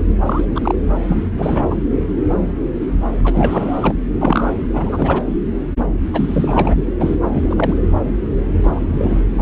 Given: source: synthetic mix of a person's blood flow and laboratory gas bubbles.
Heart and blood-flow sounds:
Doppler ultrasound of blood flow; subclavian vein
0.26-0.45 s: bubbles
0.55-0.75 s: bubbles
1.08-1.30 s: bubbles
1.38-1.75 s: bubbles
3.25-3.92 s: bubbles
4.20-4.51 s: bubbles
4.73-5.22 s: bubbles
6.12-6.75 s: bubbles
7.00-7.16 s: bubbles
7.31-7.76 s: bubbles
8.63-9.21 s: bubbles
From the record:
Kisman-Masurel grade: 233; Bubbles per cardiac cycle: several, 3 to 8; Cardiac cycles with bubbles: 50 to 99%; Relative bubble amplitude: loud (0.450 to 0.775); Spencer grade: 3 (all of the cardiac periods contain showers or single bubble signals, but not dominating or overriding the cardiac motion signals); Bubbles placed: anywhere in the cardiac cycle

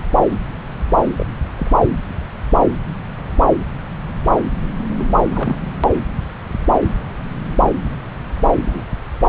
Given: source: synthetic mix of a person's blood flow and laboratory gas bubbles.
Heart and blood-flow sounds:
Doppler ultrasound of blood flow; subclavian vein
1.17-1.26 s: bubbles
1.57-1.71 s: bubbles
4.97-5.06 s: bubbles
5.24-5.71 s: bubbles
8.66-8.85 s: bubbles
From the record:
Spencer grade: 2 (many but less than half of the cardiac periods contain bubble signals, singularly or in groups); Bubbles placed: anywhere in the cardiac cycle

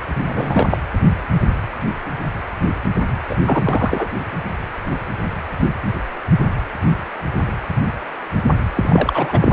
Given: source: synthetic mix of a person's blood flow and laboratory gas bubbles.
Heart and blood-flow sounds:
Doppler ultrasound of blood flow; precordium
0.25-0.78 s: bubbles
3.29-3.35 s: bubbles
3.45-4.09 s: bubbles
8.75-9.52 s: bubbles
From the record:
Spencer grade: 2 (many but less than half of the cardiac periods contain bubble signals, singularly or in groups); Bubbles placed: anywhere in the cardiac cycle

